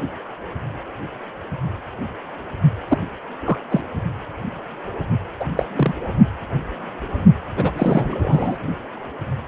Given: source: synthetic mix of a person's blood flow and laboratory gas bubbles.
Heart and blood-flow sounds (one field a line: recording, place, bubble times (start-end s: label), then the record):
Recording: Doppler ultrasound of blood flow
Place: precordium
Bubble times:
2.88-2.98 s: bubbles
3.45-3.58 s: bubbles
3.71-3.81 s: bubbles
5.40-5.45 s: bubbles
5.57-5.66 s: bubbles
5.75-5.93 s: bubbles
7.57-7.72 s: bubbles
7.76-8.57 s: bubbles
From the record:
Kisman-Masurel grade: 233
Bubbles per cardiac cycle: several, 3 to 8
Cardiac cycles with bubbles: 50 to 99%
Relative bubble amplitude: loud (0.450 to 0.775)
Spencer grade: 3 (all of the cardiac periods contain showers or single bubble signals, but not dominating or overriding the cardiac motion signals)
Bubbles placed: only in the low amplitude regions of the cardiac cycle